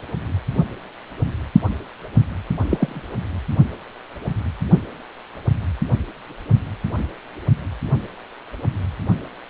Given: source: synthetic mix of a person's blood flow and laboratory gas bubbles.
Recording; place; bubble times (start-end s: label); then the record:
Doppler ultrasound of blood flow; precordium
2.69-3.03 s: bubbles
From the record:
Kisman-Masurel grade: 112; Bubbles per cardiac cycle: 1 to 2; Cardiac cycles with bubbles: 1 to 10%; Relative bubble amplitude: moderate (0.250 to 0.450); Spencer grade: 1 (occasional bubble signal discernible with the cardiac motion signal, with majority of cardiac periods free of bubbles); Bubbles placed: only in the low amplitude regions of the cardiac cycle